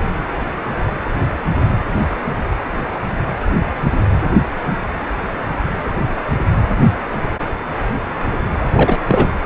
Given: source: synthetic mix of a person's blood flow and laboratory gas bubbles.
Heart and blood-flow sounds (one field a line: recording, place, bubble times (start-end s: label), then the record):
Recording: Doppler ultrasound of blood flow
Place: precordium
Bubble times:
8.61-8.66 s: bubbles
8.74-8.99 s: bubbles
9.07-9.31 s: bubbles
From the record:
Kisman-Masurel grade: 212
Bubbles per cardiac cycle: several, 3 to 8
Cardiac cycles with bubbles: 1 to 10%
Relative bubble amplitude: moderate (0.250 to 0.450)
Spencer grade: 1 (occasional bubble signal discernible with the cardiac motion signal, with majority of cardiac periods free of bubbles)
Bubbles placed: anywhere in the cardiac cycle